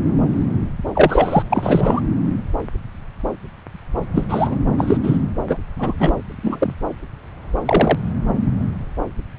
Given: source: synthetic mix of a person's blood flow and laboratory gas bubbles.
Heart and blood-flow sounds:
Doppler ultrasound of blood flow; subclavian vein
0.94-1.42 s: bubbles
1.50-2.01 s: bubbles
4.13-4.25 s: bubbles
4.29-4.59 s: bubbles
4.77-4.97 s: bubbles
5.03-5.18 s: bubbles
5.47-5.58 s: bubbles
5.76-6.13 s: bubbles
6.42-6.75 s: bubbles
7.66-7.98 s: bubbles
From the record:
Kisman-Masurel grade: 233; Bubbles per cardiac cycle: several, 3 to 8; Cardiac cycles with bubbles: 50 to 99%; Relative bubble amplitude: loud (0.450 to 0.775); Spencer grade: 3 (all of the cardiac periods contain showers or single bubble signals, but not dominating or overriding the cardiac motion signals); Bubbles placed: anywhere in the cardiac cycle

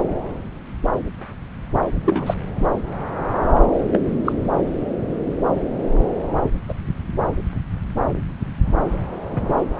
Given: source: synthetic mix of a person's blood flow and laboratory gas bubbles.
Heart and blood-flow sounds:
Doppler ultrasound of blood flow; subclavian vein
2.06-2.34 s: bubbles
3.91-4.00 s: bubbles
4.25-4.33 s: bubbles
6.69-6.74 s: bubbles
9.31-9.53 s: bubbles
From the record:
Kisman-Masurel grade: 122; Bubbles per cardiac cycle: 1 to 2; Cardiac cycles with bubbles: 10 to 50%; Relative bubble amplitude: moderate (0.250 to 0.450); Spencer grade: 2 (many but less than half of the cardiac periods contain bubble signals, singularly or in groups); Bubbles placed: anywhere in the cardiac cycle

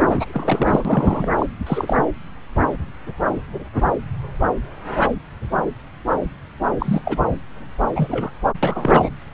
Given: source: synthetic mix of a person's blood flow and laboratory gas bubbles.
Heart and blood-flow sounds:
Doppler ultrasound of blood flow; subclavian vein
0.09-1.28 s: bubbles
1.38-1.46 s: bubbles
1.67-1.97 s: bubbles
6.79-7.02 s: bubbles
7.04-7.17 s: bubbles
7.94-8.31 s: bubbles
8.62-9.09 s: bubbles
From the record:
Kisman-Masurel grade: 222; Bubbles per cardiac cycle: several, 3 to 8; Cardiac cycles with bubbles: 10 to 50%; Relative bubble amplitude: moderate (0.250 to 0.450); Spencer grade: 2 (many but less than half of the cardiac periods contain bubble signals, singularly or in groups); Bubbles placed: anywhere in the cardiac cycle

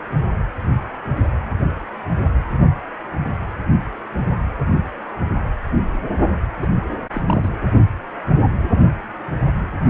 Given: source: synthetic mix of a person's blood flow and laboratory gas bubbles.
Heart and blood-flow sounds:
Doppler ultrasound of blood flow; precordium
6.62-6.67 s: bubbles
7.13-7.21 s: bubbles
7.26-7.49 s: bubbles
From the record:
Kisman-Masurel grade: 212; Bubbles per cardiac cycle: several, 3 to 8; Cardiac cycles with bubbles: 1 to 10%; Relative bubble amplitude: moderate (0.250 to 0.450); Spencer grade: 1 (occasional bubble signal discernible with the cardiac motion signal, with majority of cardiac periods free of bubbles); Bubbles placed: anywhere in the cardiac cycle

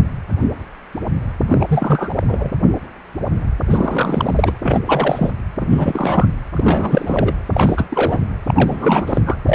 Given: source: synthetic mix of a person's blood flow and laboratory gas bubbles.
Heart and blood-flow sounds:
Doppler ultrasound of blood flow; precordium
1.45-2.51 s: bubbles
3.70-4.59 s: bubbles
4.62-4.80 s: bubbles
4.86-5.32 s: bubbles
5.61-6.25 s: bubbles
6.56-7.33 s: bubbles
7.53-7.85 s: bubbles
7.89-8.25 s: bubbles
8.49-9.23 s: bubbles
9.26-9.36 s: bubbles
9.45-9.55 s: bubbles
From the record:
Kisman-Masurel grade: 333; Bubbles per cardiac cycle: rolling drumbeat, 9 or more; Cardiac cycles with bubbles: 50 to 99%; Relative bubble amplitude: loud (0.450 to 0.775); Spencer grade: 3 (all of the cardiac periods contain showers or single bubble signals, but not dominating or overriding the cardiac motion signals); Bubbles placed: anywhere in the cardiac cycle

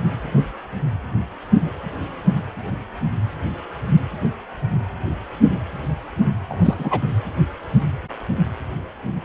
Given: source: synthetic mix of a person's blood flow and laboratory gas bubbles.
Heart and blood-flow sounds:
Doppler ultrasound of blood flow; precordium
6.49-7.09 s: bubbles
From the record:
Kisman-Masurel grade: 212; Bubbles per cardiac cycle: several, 3 to 8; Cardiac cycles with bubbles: 1 to 10%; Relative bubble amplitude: moderate (0.250 to 0.450); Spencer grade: 1 (occasional bubble signal discernible with the cardiac motion signal, with majority of cardiac periods free of bubbles); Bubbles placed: anywhere in the cardiac cycle

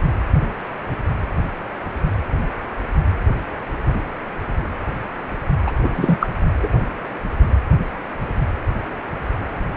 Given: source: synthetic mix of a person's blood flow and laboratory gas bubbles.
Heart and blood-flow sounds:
Doppler ultrasound of blood flow; precordium
5.67-5.72 s: bubbles
5.83-5.89 s: bubbles
5.96-6.29 s: bubbles
6.62-6.68 s: bubbles
From the record:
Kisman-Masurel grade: 213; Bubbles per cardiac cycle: several, 3 to 8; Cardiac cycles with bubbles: 1 to 10%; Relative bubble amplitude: loud (0.450 to 0.775); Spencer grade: 1 (occasional bubble signal discernible with the cardiac motion signal, with majority of cardiac periods free of bubbles); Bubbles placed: anywhere in the cardiac cycle

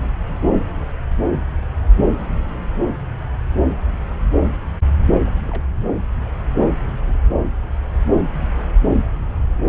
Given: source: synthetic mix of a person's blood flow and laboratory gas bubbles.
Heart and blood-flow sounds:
Doppler ultrasound of blood flow; subclavian vein
5.26-5.29 s: bubbles
5.49-5.62 s: bubbles
7.00-7.13 s: bubbles
8.55-8.63 s: bubbles
From the record:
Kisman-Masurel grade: 121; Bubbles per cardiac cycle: 1 to 2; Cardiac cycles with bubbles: 10 to 50%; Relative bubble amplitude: barely perceptible (0.100 to 0.250); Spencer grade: 2 (many but less than half of the cardiac periods contain bubble signals, singularly or in groups); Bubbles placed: anywhere in the cardiac cycle

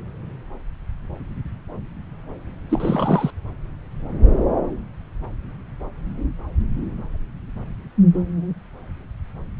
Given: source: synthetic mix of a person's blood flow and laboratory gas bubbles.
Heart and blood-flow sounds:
Doppler ultrasound of blood flow; subclavian vein
2.69-3.30 s: bubbles
From the record:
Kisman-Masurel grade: 212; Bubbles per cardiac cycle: several, 3 to 8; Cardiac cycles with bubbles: 1 to 10%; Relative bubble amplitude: moderate (0.250 to 0.450); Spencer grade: 1 (occasional bubble signal discernible with the cardiac motion signal, with majority of cardiac periods free of bubbles); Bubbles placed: anywhere in the cardiac cycle

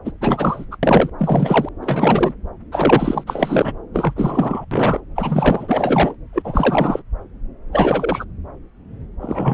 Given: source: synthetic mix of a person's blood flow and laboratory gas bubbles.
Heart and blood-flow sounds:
Doppler ultrasound of blood flow; subclavian vein
0.05-0.11 s: bubbles
0.21-0.66 s: bubbles
0.71-0.76 s: bubbles
0.82-1.10 s: bubbles
1.18-1.69 s: bubbles
1.81-2.33 s: bubbles
2.71-3.23 s: bubbles
3.27-3.73 s: bubbles
3.94-4.13 s: bubbles
4.16-4.65 s: bubbles
4.71-5.01 s: bubbles
5.16-6.15 s: bubbles
6.33-7.03 s: bubbles
7.73-8.24 s: bubbles
9.21-9.54 s: bubbles
From the record:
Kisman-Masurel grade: 333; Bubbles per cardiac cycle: rolling drumbeat, 9 or more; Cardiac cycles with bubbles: 50 to 99%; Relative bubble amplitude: loud (0.450 to 0.775); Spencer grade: 3 (all of the cardiac periods contain showers or single bubble signals, but not dominating or overriding the cardiac motion signals); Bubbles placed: anywhere in the cardiac cycle

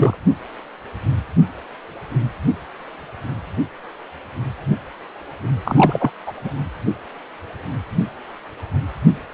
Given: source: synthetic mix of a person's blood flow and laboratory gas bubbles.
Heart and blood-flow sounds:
Doppler ultrasound of blood flow; precordium
0.00-0.16 s: bubbles
5.64-6.11 s: bubbles
6.26-6.33 s: bubbles
6.44-6.50 s: bubbles
From the record:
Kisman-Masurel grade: 222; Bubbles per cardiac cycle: several, 3 to 8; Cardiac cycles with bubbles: 10 to 50%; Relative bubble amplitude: moderate (0.250 to 0.450); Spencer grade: 2 (many but less than half of the cardiac periods contain bubble signals, singularly or in groups); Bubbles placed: anywhere in the cardiac cycle

